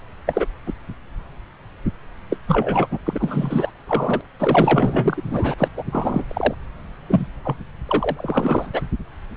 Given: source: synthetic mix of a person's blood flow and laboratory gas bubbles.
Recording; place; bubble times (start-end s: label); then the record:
Doppler ultrasound of blood flow; subclavian vein
0.27-0.46 s: bubbles
0.67-0.73 s: bubbles
2.30-2.37 s: bubbles
2.48-2.87 s: bubbles
2.91-2.99 s: bubbles
3.05-3.71 s: bubbles
3.87-4.21 s: bubbles
4.39-5.23 s: bubbles
5.29-5.54 s: bubbles
5.57-5.68 s: bubbles
5.76-5.83 s: bubbles
5.91-6.24 s: bubbles
6.28-6.54 s: bubbles
7.07-7.27 s: bubbles
7.44-7.56 s: bubbles
7.86-8.81 s: bubbles
From the record:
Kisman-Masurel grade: 332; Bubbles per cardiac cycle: rolling drumbeat, 9 or more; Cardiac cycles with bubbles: 50 to 99%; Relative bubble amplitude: moderate (0.250 to 0.450); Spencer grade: 3 (all of the cardiac periods contain showers or single bubble signals, but not dominating or overriding the cardiac motion signals); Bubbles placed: anywhere in the cardiac cycle